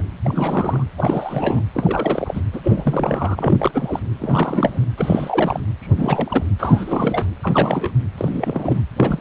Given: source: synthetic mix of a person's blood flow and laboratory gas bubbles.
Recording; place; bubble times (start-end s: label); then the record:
Doppler ultrasound of blood flow; precordium
0.00-0.02 s: bubbles
0.24-0.85 s: bubbles
0.97-1.64 s: bubbles
1.74-2.42 s: bubbles
2.53-2.61 s: bubbles
2.63-4.00 s: bubbles
4.19-4.85 s: bubbles
4.98-5.61 s: bubbles
5.81-6.43 s: bubbles
6.58-7.25 s: bubbles
7.42-7.92 s: bubbles
8.17-8.80 s: bubbles
8.96-9.21 s: bubbles
From the record:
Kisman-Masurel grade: 343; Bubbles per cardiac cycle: rolling drumbeat, 9 or more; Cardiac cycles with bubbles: 100%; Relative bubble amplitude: loud (0.450 to 0.775); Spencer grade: 3 (all of the cardiac periods contain showers or single bubble signals, but not dominating or overriding the cardiac motion signals); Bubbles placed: anywhere in the cardiac cycle